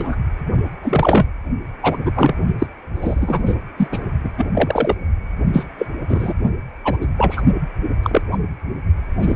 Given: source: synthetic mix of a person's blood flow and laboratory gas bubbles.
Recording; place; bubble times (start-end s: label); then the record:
Doppler ultrasound of blood flow; precordium
0.00-0.15 s: bubbles
0.82-1.27 s: bubbles
1.82-1.97 s: bubbles
2.05-2.12 s: bubbles
2.16-2.35 s: bubbles
2.58-2.67 s: bubbles
2.95-3.43 s: bubbles
3.46-3.56 s: bubbles
3.77-3.88 s: bubbles
3.92-3.99 s: bubbles
4.24-4.30 s: bubbles
4.37-4.46 s: bubbles
4.54-4.96 s: bubbles
5.52-5.66 s: bubbles
5.79-5.86 s: bubbles
6.08-6.33 s: bubbles
6.84-6.97 s: bubbles
7.01-7.07 s: bubbles
7.17-7.42 s: bubbles
8.03-8.21 s: bubbles
8.31-8.38 s: bubbles
9.19-9.36 s: bubbles
From the record:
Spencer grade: 3 (all of the cardiac periods contain showers or single bubble signals, but not dominating or overriding the cardiac motion signals); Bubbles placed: only in the low amplitude regions of the cardiac cycle